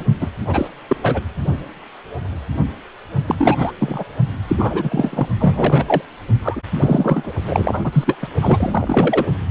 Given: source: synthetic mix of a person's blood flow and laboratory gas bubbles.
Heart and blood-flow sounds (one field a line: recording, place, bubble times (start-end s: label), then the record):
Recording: Doppler ultrasound of blood flow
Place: precordium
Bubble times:
0.00-0.04 s: bubbles
0.20-0.29 s: bubbles
0.47-0.68 s: bubbles
0.89-0.97 s: bubbles
1.02-1.22 s: bubbles
3.27-3.35 s: bubbles
3.38-3.71 s: bubbles
3.78-4.04 s: bubbles
4.48-5.28 s: bubbles
5.40-6.02 s: bubbles
6.43-6.62 s: bubbles
6.80-7.33 s: bubbles
7.47-7.81 s: bubbles
7.84-8.17 s: bubbles
8.21-8.29 s: bubbles
8.42-9.26 s: bubbles
From the record:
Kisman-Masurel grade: 333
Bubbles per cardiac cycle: rolling drumbeat, 9 or more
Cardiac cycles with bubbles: 50 to 99%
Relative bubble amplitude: loud (0.450 to 0.775)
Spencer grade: 3 (all of the cardiac periods contain showers or single bubble signals, but not dominating or overriding the cardiac motion signals)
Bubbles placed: only in the low amplitude regions of the cardiac cycle